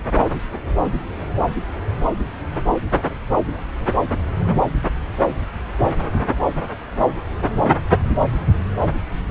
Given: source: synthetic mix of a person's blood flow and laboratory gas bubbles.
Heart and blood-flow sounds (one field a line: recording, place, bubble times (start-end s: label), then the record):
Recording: Doppler ultrasound of blood flow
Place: subclavian vein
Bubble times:
no bubbles
From the record:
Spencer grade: 0 (complete lack of bubble signals)